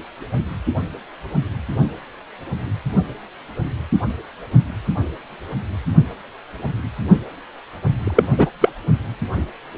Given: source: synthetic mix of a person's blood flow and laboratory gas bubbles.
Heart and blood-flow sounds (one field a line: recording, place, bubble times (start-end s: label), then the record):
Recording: Doppler ultrasound of blood flow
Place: precordium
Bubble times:
8.04-8.28 s: bubbles
8.31-8.50 s: bubbles
8.61-8.69 s: bubbles
From the record:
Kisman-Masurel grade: 213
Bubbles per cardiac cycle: several, 3 to 8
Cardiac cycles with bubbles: 1 to 10%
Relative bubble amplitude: loud (0.450 to 0.775)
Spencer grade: 1 (occasional bubble signal discernible with the cardiac motion signal, with majority of cardiac periods free of bubbles)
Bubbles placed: only in the low amplitude regions of the cardiac cycle